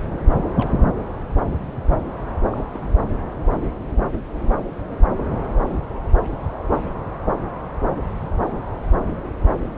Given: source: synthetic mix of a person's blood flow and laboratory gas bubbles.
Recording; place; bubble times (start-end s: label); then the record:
Doppler ultrasound of blood flow; subclavian vein
0.47-0.53 s: bubbles
0.57-0.84 s: bubbles
2.51-2.67 s: bubbles
2.73-2.81 s: bubbles
2.88-2.92 s: bubbles
From the record:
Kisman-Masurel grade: 211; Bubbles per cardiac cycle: several, 3 to 8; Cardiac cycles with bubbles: 1 to 10%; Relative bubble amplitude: barely perceptible (0.100 to 0.250); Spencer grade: 1 (occasional bubble signal discernible with the cardiac motion signal, with majority of cardiac periods free of bubbles); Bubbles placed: anywhere in the cardiac cycle